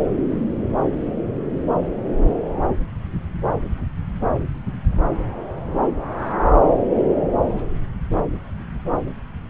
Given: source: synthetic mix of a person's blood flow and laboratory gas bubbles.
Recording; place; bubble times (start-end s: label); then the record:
Doppler ultrasound of blood flow; subclavian vein
no bubbles
From the record:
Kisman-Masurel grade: 000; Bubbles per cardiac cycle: 0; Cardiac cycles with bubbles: 0%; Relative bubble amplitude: no bubbles discernible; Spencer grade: 0 (complete lack of bubble signals)